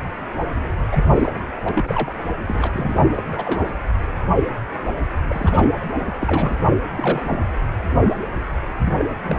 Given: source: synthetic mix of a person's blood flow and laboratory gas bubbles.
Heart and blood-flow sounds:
Doppler ultrasound of blood flow; precordium
0.92-1.04 s: bubbles
1.15-1.31 s: bubbles
1.65-1.69 s: bubbles
1.75-2.14 s: bubbles
2.47-3.05 s: bubbles
3.15-3.23 s: bubbles
3.31-3.73 s: bubbles
5.29-5.68 s: bubbles
5.99-6.14 s: bubbles
6.19-6.57 s: bubbles
6.96-7.39 s: bubbles
8.84-8.93 s: bubbles
8.98-9.05 s: bubbles
9.26-9.37 s: bubbles
From the record:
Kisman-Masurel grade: 232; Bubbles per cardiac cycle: several, 3 to 8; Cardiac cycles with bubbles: 50 to 99%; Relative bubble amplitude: moderate (0.250 to 0.450); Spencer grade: 3 (all of the cardiac periods contain showers or single bubble signals, but not dominating or overriding the cardiac motion signals); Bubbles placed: anywhere in the cardiac cycle

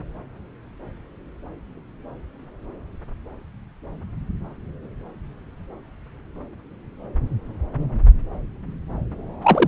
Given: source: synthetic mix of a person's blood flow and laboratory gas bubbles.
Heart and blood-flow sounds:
Doppler ultrasound of blood flow; subclavian vein
9.43-9.68 s: bubbles
From the record:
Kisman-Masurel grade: 113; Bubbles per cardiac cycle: 1 to 2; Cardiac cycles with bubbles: 1 to 10%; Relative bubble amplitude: loud (0.450 to 0.775); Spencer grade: 1 (occasional bubble signal discernible with the cardiac motion signal, with majority of cardiac periods free of bubbles); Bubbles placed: anywhere in the cardiac cycle

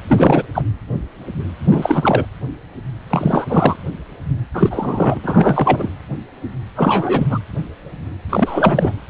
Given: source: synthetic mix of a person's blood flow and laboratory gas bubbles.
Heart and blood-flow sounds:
Doppler ultrasound of blood flow; precordium
0.08-0.42 s: bubbles
0.54-0.62 s: bubbles
1.70-2.25 s: bubbles
3.10-3.76 s: bubbles
4.54-5.19 s: bubbles
5.23-5.88 s: bubbles
6.75-7.27 s: bubbles
7.29-7.39 s: bubbles
8.29-8.93 s: bubbles
From the record:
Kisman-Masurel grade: 333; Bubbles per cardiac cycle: rolling drumbeat, 9 or more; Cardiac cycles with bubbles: 50 to 99%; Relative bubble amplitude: loud (0.450 to 0.775); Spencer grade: 3 (all of the cardiac periods contain showers or single bubble signals, but not dominating or overriding the cardiac motion signals); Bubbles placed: anywhere in the cardiac cycle

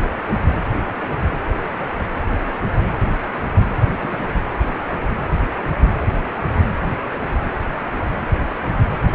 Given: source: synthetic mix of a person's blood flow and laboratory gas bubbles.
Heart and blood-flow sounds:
Doppler ultrasound of blood flow; precordium
3.92-4.08 s: bubbles
4.10-4.18 s: bubbles
From the record:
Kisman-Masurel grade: 111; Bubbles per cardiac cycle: 1 to 2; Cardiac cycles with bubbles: 1 to 10%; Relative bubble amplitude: barely perceptible (0.100 to 0.250); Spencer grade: 1 (occasional bubble signal discernible with the cardiac motion signal, with majority of cardiac periods free of bubbles); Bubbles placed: anywhere in the cardiac cycle

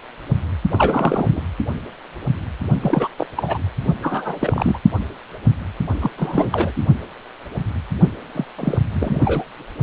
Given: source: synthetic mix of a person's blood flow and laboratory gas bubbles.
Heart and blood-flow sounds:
Doppler ultrasound of blood flow; precordium
0.71-1.44 s: bubbles
2.81-3.08 s: bubbles
3.17-3.27 s: bubbles
3.36-3.58 s: bubbles
4.02-4.78 s: bubbles
6.01-6.11 s: bubbles
6.17-6.72 s: bubbles
6.76-6.83 s: bubbles
8.34-8.45 s: bubbles
8.57-8.78 s: bubbles
8.93-9.45 s: bubbles
From the record:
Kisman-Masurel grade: 332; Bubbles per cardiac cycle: rolling drumbeat, 9 or more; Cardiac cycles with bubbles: 50 to 99%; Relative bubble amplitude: moderate (0.250 to 0.450); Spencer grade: 3 (all of the cardiac periods contain showers or single bubble signals, but not dominating or overriding the cardiac motion signals); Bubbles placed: only in the low amplitude regions of the cardiac cycle

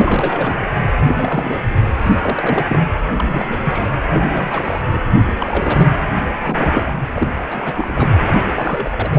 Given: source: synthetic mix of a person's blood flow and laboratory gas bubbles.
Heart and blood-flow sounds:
Doppler ultrasound of blood flow; precordium
0.00-0.66 s: bubbles
1.02-1.15 s: bubbles
1.17-1.71 s: bubbles
1.98-2.17 s: bubbles
2.22-2.65 s: bubbles
2.70-2.83 s: bubbles
3.16-3.88 s: bubbles
4.06-4.83 s: bubbles
4.85-4.98 s: bubbles
5.39-5.87 s: bubbles
6.39-6.94 s: bubbles
7.14-7.28 s: bubbles
7.50-8.28 s: bubbles
8.54-9.19 s: bubbles
From the record:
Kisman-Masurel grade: 342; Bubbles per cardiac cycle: rolling drumbeat, 9 or more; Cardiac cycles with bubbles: 100%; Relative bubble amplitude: moderate (0.250 to 0.450); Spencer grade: 3 (all of the cardiac periods contain showers or single bubble signals, but not dominating or overriding the cardiac motion signals); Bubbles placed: anywhere in the cardiac cycle

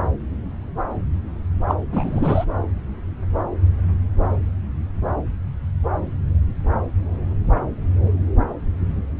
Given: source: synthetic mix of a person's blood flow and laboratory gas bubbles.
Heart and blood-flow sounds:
Doppler ultrasound of blood flow; subclavian vein
1.67-1.75 s: bubbles
1.92-2.45 s: bubbles
From the record:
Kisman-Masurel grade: 222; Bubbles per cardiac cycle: several, 3 to 8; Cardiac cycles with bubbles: 10 to 50%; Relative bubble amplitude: moderate (0.250 to 0.450); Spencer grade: 2 (many but less than half of the cardiac periods contain bubble signals, singularly or in groups); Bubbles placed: anywhere in the cardiac cycle

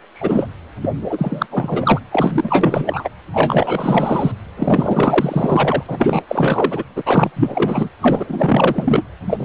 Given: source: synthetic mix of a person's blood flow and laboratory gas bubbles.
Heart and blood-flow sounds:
Doppler ultrasound of blood flow; precordium
0.15-0.47 s: bubbles
0.82-0.90 s: bubbles
1.10-1.47 s: bubbles
1.50-2.00 s: bubbles
2.11-3.08 s: bubbles
3.32-4.32 s: bubbles
4.57-5.83 s: bubbles
5.86-6.23 s: bubbles
6.28-6.83 s: bubbles
6.96-7.03 s: bubbles
7.06-7.31 s: bubbles
7.36-7.89 s: bubbles
8.00-9.03 s: bubbles
9.27-9.44 s: bubbles
From the record:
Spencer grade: 4 (maximum detectable bubble signal sounding continuously throughout systole and diastole of every cardiac period, and overriding the amplitude of the normal cardiac signals); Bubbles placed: anywhere in the cardiac cycle

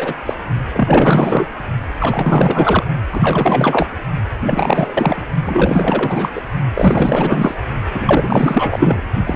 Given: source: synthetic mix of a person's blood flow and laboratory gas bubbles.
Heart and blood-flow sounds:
Doppler ultrasound of blood flow; precordium
0.00-0.14 s: bubbles
0.26-0.34 s: bubbles
0.74-1.48 s: bubbles
2.00-2.84 s: bubbles
3.12-3.88 s: bubbles
4.39-5.22 s: bubbles
5.45-6.30 s: bubbles
6.34-6.42 s: bubbles
6.73-7.54 s: bubbles
7.94-9.02 s: bubbles
9.25-9.36 s: bubbles
From the record:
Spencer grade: 4 (maximum detectable bubble signal sounding continuously throughout systole and diastole of every cardiac period, and overriding the amplitude of the normal cardiac signals); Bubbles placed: only in the low amplitude regions of the cardiac cycle

